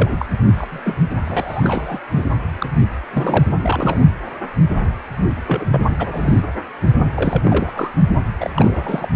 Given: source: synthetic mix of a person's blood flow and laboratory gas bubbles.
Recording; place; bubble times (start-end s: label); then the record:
Doppler ultrasound of blood flow; precordium
0.00-0.25 s: bubbles
0.57-0.98 s: bubbles
1.24-1.99 s: bubbles
2.16-2.27 s: bubbles
2.58-2.66 s: bubbles
3.12-3.45 s: bubbles
3.62-4.00 s: bubbles
5.47-5.65 s: bubbles
5.71-6.40 s: bubbles
7.14-7.89 s: bubbles
8.40-8.50 s: bubbles
8.56-9.08 s: bubbles
From the record:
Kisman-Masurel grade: 332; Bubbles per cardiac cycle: rolling drumbeat, 9 or more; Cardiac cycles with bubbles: 50 to 99%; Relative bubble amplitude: moderate (0.250 to 0.450); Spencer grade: 3 (all of the cardiac periods contain showers or single bubble signals, but not dominating or overriding the cardiac motion signals); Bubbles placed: only in the low amplitude regions of the cardiac cycle